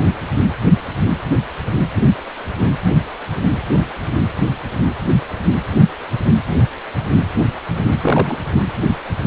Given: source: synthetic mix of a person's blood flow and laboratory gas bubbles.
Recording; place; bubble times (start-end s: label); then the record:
Doppler ultrasound of blood flow; precordium
8.02-8.38 s: bubbles
From the record:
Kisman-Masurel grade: 212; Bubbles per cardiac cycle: several, 3 to 8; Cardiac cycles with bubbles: 1 to 10%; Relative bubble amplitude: moderate (0.250 to 0.450); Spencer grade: 1 (occasional bubble signal discernible with the cardiac motion signal, with majority of cardiac periods free of bubbles); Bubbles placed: anywhere in the cardiac cycle